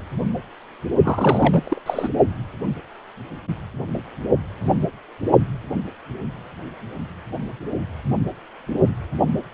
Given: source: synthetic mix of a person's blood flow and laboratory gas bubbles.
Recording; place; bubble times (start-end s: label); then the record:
Doppler ultrasound of blood flow; precordium
1.04-1.81 s: bubbles
1.86-2.08 s: bubbles
From the record:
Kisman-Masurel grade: 222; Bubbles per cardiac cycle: several, 3 to 8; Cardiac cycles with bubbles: 10 to 50%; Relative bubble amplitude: moderate (0.250 to 0.450); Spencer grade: 2 (many but less than half of the cardiac periods contain bubble signals, singularly or in groups); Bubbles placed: only in the low amplitude regions of the cardiac cycle